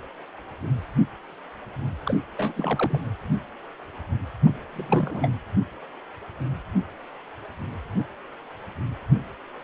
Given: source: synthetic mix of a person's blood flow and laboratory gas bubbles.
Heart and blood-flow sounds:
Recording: Doppler ultrasound of blood flow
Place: precordium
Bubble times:
2.04-2.19 s: bubbles
2.37-3.01 s: bubbles
4.46-4.50 s: bubbles
4.73-5.31 s: bubbles
From the record:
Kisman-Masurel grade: 221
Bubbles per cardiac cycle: several, 3 to 8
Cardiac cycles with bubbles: 10 to 50%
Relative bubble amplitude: barely perceptible (0.100 to 0.250)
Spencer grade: 2 (many but less than half of the cardiac periods contain bubble signals, singularly or in groups)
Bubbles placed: anywhere in the cardiac cycle

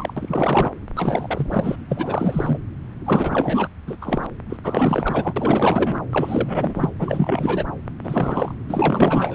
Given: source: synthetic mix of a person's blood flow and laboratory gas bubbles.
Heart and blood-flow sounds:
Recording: Doppler ultrasound of blood flow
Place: subclavian vein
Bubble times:
0.00-0.14 s: bubbles
0.16-0.70 s: bubbles
0.95-1.76 s: bubbles
1.89-2.58 s: bubbles
3.04-3.68 s: bubbles
3.87-3.97 s: bubbles
4.01-4.26 s: bubbles
4.49-4.57 s: bubbles
4.63-6.05 s: bubbles
6.11-6.90 s: bubbles
6.99-7.67 s: bubbles
8.04-8.54 s: bubbles
8.69-9.35 s: bubbles
From the record:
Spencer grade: 4 (maximum detectable bubble signal sounding continuously throughout systole and diastole of every cardiac period, and overriding the amplitude of the normal cardiac signals)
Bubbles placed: anywhere in the cardiac cycle

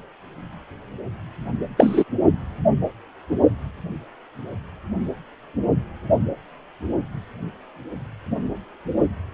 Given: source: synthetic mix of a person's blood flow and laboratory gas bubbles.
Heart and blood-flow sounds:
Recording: Doppler ultrasound of blood flow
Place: precordium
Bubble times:
1.78-2.04 s: bubbles
From the record:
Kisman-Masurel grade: 113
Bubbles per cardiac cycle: 1 to 2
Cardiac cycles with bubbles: 1 to 10%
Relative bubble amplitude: loud (0.450 to 0.775)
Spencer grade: 1 (occasional bubble signal discernible with the cardiac motion signal, with majority of cardiac periods free of bubbles)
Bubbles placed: only in the low amplitude regions of the cardiac cycle

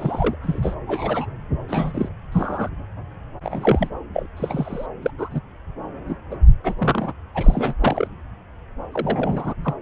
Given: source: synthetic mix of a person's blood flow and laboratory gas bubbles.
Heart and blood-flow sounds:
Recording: Doppler ultrasound of blood flow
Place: subclavian vein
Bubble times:
0.00-0.36 s: bubbles
0.43-0.74 s: bubbles
0.87-1.26 s: bubbles
1.68-2.09 s: bubbles
2.32-2.70 s: bubbles
3.43-3.89 s: bubbles
4.13-4.26 s: bubbles
4.36-4.86 s: bubbles
5.02-5.10 s: bubbles
5.17-5.40 s: bubbles
6.07-6.15 s: bubbles
6.30-6.36 s: bubbles
6.63-6.75 s: bubbles
6.78-7.13 s: bubbles
7.34-7.74 s: bubbles
7.80-8.08 s: bubbles
8.94-9.54 s: bubbles
9.64-9.74 s: bubbles
From the record:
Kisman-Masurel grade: 242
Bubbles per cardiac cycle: several, 3 to 8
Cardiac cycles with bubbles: 100%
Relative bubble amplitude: moderate (0.250 to 0.450)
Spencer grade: 3 (all of the cardiac periods contain showers or single bubble signals, but not dominating or overriding the cardiac motion signals)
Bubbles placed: anywhere in the cardiac cycle

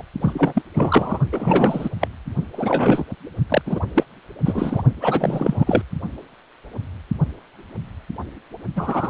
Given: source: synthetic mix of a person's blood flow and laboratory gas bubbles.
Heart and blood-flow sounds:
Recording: Doppler ultrasound of blood flow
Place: precordium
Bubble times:
0.00-0.02 s: bubbles
0.21-0.62 s: bubbles
0.74-1.19 s: bubbles
1.32-1.90 s: bubbles
2.00-2.08 s: bubbles
2.52-3.05 s: bubbles
3.49-3.62 s: bubbles
3.66-3.80 s: bubbles
3.95-4.05 s: bubbles
4.44-4.83 s: bubbles
5.00-5.82 s: bubbles
8.76-9.10 s: bubbles
From the record:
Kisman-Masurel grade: 333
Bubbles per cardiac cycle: rolling drumbeat, 9 or more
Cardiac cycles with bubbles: 50 to 99%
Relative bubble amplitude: loud (0.450 to 0.775)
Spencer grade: 3 (all of the cardiac periods contain showers or single bubble signals, but not dominating or overriding the cardiac motion signals)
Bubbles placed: only in the low amplitude regions of the cardiac cycle

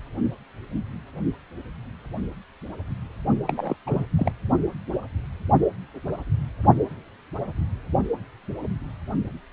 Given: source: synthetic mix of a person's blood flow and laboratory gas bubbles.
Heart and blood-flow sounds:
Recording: Doppler ultrasound of blood flow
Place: precordium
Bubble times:
3.47-3.74 s: bubbles
3.86-4.04 s: bubbles
4.16-4.32 s: bubbles
From the record:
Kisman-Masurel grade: 211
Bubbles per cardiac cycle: several, 3 to 8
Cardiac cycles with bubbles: 1 to 10%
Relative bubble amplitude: barely perceptible (0.100 to 0.250)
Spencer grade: 1 (occasional bubble signal discernible with the cardiac motion signal, with majority of cardiac periods free of bubbles)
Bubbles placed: only in the low amplitude regions of the cardiac cycle

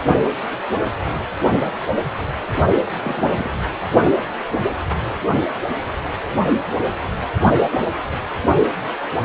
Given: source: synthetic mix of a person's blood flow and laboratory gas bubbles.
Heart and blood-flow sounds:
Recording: Doppler ultrasound of blood flow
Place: precordium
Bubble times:
0.00-0.02 s: bubbles
2.98-3.50 s: bubbles
From the record:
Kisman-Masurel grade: 122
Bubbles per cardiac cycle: 1 to 2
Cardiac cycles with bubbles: 10 to 50%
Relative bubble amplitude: moderate (0.250 to 0.450)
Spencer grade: 2 (many but less than half of the cardiac periods contain bubble signals, singularly or in groups)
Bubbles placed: only in the low amplitude regions of the cardiac cycle

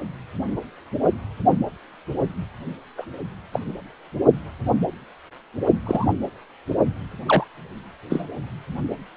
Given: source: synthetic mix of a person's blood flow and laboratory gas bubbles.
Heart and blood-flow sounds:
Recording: Doppler ultrasound of blood flow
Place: precordium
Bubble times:
2.97-3.05 s: bubbles
3.52-3.60 s: bubbles
5.85-6.07 s: bubbles
7.25-7.44 s: bubbles
8.10-8.26 s: bubbles
From the record:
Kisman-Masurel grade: 122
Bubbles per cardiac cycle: 1 to 2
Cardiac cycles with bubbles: 10 to 50%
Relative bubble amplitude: moderate (0.250 to 0.450)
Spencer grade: 2 (many but less than half of the cardiac periods contain bubble signals, singularly or in groups)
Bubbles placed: only in the low amplitude regions of the cardiac cycle

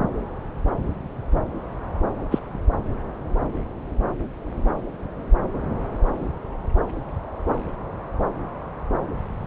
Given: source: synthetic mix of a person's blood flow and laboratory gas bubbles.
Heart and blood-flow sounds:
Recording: Doppler ultrasound of blood flow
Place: subclavian vein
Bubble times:
2.31-2.39 s: bubbles
From the record:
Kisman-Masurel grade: 112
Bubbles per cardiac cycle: 1 to 2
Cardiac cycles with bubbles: 1 to 10%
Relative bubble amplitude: moderate (0.250 to 0.450)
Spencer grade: 1 (occasional bubble signal discernible with the cardiac motion signal, with majority of cardiac periods free of bubbles)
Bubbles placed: anywhere in the cardiac cycle

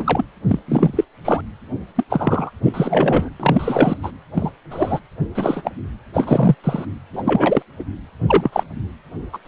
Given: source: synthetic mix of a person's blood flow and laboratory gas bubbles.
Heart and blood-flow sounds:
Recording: Doppler ultrasound of blood flow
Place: precordium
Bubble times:
0.00-0.24 s: bubbles
0.47-0.59 s: bubbles
0.68-0.93 s: bubbles
0.96-1.04 s: bubbles
1.24-1.42 s: bubbles
1.95-2.04 s: bubbles
2.09-2.51 s: bubbles
2.62-3.30 s: bubbles
3.40-3.97 s: bubbles
4.02-4.12 s: bubbles
4.34-4.50 s: bubbles
4.71-5.00 s: bubbles
5.35-5.71 s: bubbles
6.13-6.55 s: bubbles
6.63-6.85 s: bubbles
7.13-7.62 s: bubbles
7.79-7.84 s: bubbles
8.27-8.64 s: bubbles
9.33-9.39 s: bubbles
9.45-9.48 s: bubbles
From the record:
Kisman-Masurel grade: 243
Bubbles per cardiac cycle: several, 3 to 8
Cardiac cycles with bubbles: 100%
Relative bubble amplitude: loud (0.450 to 0.775)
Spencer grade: 3 (all of the cardiac periods contain showers or single bubble signals, but not dominating or overriding the cardiac motion signals)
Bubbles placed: anywhere in the cardiac cycle

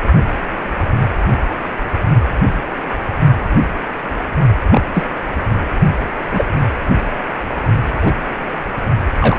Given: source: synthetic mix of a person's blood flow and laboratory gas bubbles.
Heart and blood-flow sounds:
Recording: Doppler ultrasound of blood flow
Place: precordium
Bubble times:
4.71-4.82 s: bubbles
4.94-5.06 s: bubbles
6.33-6.43 s: bubbles
7.91-8.13 s: bubbles
9.19-9.39 s: bubbles
From the record:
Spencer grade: 2 (many but less than half of the cardiac periods contain bubble signals, singularly or in groups)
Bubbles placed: only in the low amplitude regions of the cardiac cycle

